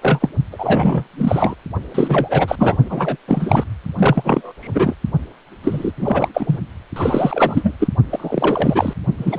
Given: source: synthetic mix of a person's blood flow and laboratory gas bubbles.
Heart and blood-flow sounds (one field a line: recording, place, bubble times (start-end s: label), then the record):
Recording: Doppler ultrasound of blood flow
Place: precordium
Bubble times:
0.00-0.30 s: bubbles
0.52-1.04 s: bubbles
1.17-1.55 s: bubbles
1.94-2.77 s: bubbles
2.84-3.17 s: bubbles
3.28-3.63 s: bubbles
3.98-4.52 s: bubbles
4.60-4.94 s: bubbles
5.63-5.92 s: bubbles
5.97-6.29 s: bubbles
6.33-6.59 s: bubbles
6.96-7.75 s: bubbles
7.79-7.88 s: bubbles
8.10-8.94 s: bubbles
9.17-9.39 s: bubbles
From the record:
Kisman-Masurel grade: 333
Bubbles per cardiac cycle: rolling drumbeat, 9 or more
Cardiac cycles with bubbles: 50 to 99%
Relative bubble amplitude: loud (0.450 to 0.775)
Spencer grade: 3 (all of the cardiac periods contain showers or single bubble signals, but not dominating or overriding the cardiac motion signals)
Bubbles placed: only in the low amplitude regions of the cardiac cycle